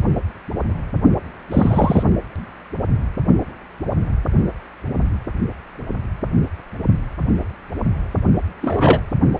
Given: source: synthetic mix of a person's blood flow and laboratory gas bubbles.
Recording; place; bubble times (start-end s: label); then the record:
Doppler ultrasound of blood flow; precordium
1.51-2.03 s: bubbles
8.62-8.99 s: bubbles
From the record:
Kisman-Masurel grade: 123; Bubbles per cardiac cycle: 1 to 2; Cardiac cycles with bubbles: 10 to 50%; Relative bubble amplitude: loud (0.450 to 0.775); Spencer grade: 2 (many but less than half of the cardiac periods contain bubble signals, singularly or in groups); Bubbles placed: only in the low amplitude regions of the cardiac cycle